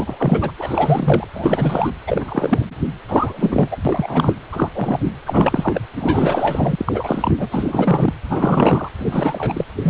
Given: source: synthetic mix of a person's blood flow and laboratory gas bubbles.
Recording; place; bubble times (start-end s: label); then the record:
Doppler ultrasound of blood flow; precordium
0.00-0.52 s: bubbles
0.57-1.27 s: bubbles
1.34-1.92 s: bubbles
2.06-2.65 s: bubbles
3.08-3.68 s: bubbles
3.71-3.77 s: bubbles
3.85-4.33 s: bubbles
4.52-4.69 s: bubbles
4.74-5.10 s: bubbles
5.25-5.82 s: bubbles
5.98-6.75 s: bubbles
6.78-7.47 s: bubbles
7.50-8.13 s: bubbles
8.29-8.88 s: bubbles
8.98-9.64 s: bubbles
9.82-9.90 s: bubbles
From the record:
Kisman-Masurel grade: 343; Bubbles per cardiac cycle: rolling drumbeat, 9 or more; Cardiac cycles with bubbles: 100%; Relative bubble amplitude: loud (0.450 to 0.775); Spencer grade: 3 (all of the cardiac periods contain showers or single bubble signals, but not dominating or overriding the cardiac motion signals); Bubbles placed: anywhere in the cardiac cycle